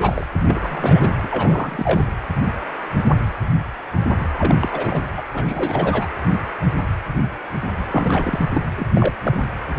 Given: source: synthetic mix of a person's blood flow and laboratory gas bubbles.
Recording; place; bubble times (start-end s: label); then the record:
Doppler ultrasound of blood flow; precordium
0.00-0.27 s: bubbles
0.46-1.15 s: bubbles
1.23-1.28 s: bubbles
1.32-2.07 s: bubbles
4.38-4.55 s: bubbles
4.60-5.07 s: bubbles
5.17-5.22 s: bubbles
5.33-6.06 s: bubbles
7.91-8.46 s: bubbles
8.53-8.62 s: bubbles
8.76-8.87 s: bubbles
8.95-9.14 s: bubbles
9.23-9.51 s: bubbles
From the record:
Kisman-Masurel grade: 332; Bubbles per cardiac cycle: rolling drumbeat, 9 or more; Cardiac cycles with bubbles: 50 to 99%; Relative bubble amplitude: moderate (0.250 to 0.450); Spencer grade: 3 (all of the cardiac periods contain showers or single bubble signals, but not dominating or overriding the cardiac motion signals); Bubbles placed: anywhere in the cardiac cycle